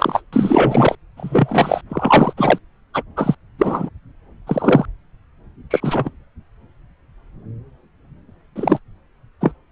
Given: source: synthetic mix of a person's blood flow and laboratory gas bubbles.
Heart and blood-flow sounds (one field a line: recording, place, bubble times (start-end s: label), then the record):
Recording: Doppler ultrasound of blood flow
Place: subclavian vein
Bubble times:
0.00-0.21 s: bubbles
0.33-0.95 s: bubbles
1.17-1.81 s: bubbles
1.90-2.33 s: bubbles
2.37-2.58 s: bubbles
2.93-3.02 s: bubbles
3.16-3.35 s: bubbles
3.58-3.89 s: bubbles
4.46-4.86 s: bubbles
5.70-6.10 s: bubbles
8.55-8.79 s: bubbles
9.41-9.52 s: bubbles
From the record:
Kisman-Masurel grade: 233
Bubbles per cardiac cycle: several, 3 to 8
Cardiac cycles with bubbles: 50 to 99%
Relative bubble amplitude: loud (0.450 to 0.775)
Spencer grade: 3 (all of the cardiac periods contain showers or single bubble signals, but not dominating or overriding the cardiac motion signals)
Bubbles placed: anywhere in the cardiac cycle